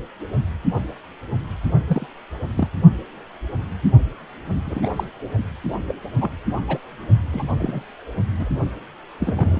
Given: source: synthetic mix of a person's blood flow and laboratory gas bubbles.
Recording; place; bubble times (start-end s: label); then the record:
Doppler ultrasound of blood flow; precordium
1.87-2.06 s: bubbles
2.55-2.68 s: bubbles
4.66-4.90 s: bubbles
4.96-5.04 s: bubbles
5.88-5.95 s: bubbles
6.20-6.31 s: bubbles
6.68-6.78 s: bubbles
7.33-7.85 s: bubbles
8.39-8.49 s: bubbles
9.20-9.60 s: bubbles
From the record:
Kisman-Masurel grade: 232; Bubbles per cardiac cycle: several, 3 to 8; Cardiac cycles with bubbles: 50 to 99%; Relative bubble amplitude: moderate (0.250 to 0.450); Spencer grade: 3 (all of the cardiac periods contain showers or single bubble signals, but not dominating or overriding the cardiac motion signals); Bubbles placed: only in the low amplitude regions of the cardiac cycle